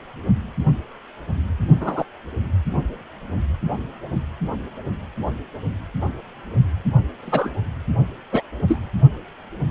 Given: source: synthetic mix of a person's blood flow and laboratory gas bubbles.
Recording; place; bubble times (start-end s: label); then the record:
Doppler ultrasound of blood flow; precordium
1.80-2.05 s: bubbles
7.21-7.50 s: bubbles
8.32-8.43 s: bubbles
8.68-8.79 s: bubbles
From the record:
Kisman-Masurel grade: 122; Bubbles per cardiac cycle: 1 to 2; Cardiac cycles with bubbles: 10 to 50%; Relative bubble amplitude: moderate (0.250 to 0.450); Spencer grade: 2 (many but less than half of the cardiac periods contain bubble signals, singularly or in groups); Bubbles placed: only in the low amplitude regions of the cardiac cycle